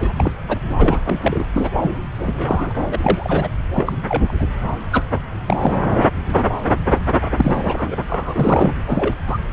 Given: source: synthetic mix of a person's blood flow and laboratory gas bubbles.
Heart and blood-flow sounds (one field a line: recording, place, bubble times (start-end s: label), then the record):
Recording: Doppler ultrasound of blood flow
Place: subclavian vein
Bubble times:
0.00-0.12 s: bubbles
0.18-0.31 s: bubbles
0.48-0.58 s: bubbles
0.78-1.01 s: bubbles
1.04-1.45 s: bubbles
1.53-1.70 s: bubbles
1.82-1.91 s: bubbles
2.17-2.75 s: bubbles
2.91-2.98 s: bubbles
3.01-3.49 s: bubbles
3.72-3.92 s: bubbles
4.08-4.45 s: bubbles
4.92-5.03 s: bubbles
5.47-5.77 s: bubbles
7.37-7.97 s: bubbles
8.09-8.72 s: bubbles
8.87-9.15 s: bubbles
9.27-9.38 s: bubbles
From the record:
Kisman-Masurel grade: 232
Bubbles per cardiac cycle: several, 3 to 8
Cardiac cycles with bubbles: 50 to 99%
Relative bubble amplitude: moderate (0.250 to 0.450)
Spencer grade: 3 (all of the cardiac periods contain showers or single bubble signals, but not dominating or overriding the cardiac motion signals)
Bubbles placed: anywhere in the cardiac cycle